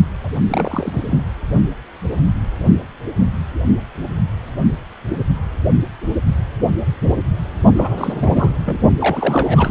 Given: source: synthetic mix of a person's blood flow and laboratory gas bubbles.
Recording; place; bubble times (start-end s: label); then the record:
Doppler ultrasound of blood flow; precordium
0.23-0.30 s: bubbles
0.48-1.00 s: bubbles
1.06-1.24 s: bubbles
7.76-8.50 s: bubbles
8.65-8.79 s: bubbles
8.97-9.71 s: bubbles
From the record:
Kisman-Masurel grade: 332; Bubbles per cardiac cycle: rolling drumbeat, 9 or more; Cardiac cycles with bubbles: 50 to 99%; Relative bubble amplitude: moderate (0.250 to 0.450); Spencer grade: 3 (all of the cardiac periods contain showers or single bubble signals, but not dominating or overriding the cardiac motion signals); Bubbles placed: only in the low amplitude regions of the cardiac cycle